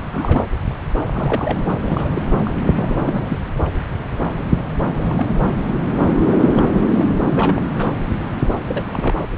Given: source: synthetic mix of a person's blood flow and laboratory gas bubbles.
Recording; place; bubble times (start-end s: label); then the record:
Doppler ultrasound of blood flow; subclavian vein
0.11-0.48 s: bubbles
1.13-1.57 s: bubbles
1.82-2.09 s: bubbles
2.14-2.22 s: bubbles
2.31-2.37 s: bubbles
2.45-2.54 s: bubbles
2.75-3.38 s: bubbles
4.99-5.36 s: bubbles
6.26-6.38 s: bubbles
6.54-6.68 s: bubbles
6.95-7.13 s: bubbles
7.30-7.62 s: bubbles
7.75-7.91 s: bubbles
8.68-9.15 s: bubbles
From the record:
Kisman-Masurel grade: 221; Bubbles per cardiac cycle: several, 3 to 8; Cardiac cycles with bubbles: 10 to 50%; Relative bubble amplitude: barely perceptible (0.100 to 0.250); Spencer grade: 2 (many but less than half of the cardiac periods contain bubble signals, singularly or in groups); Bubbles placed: anywhere in the cardiac cycle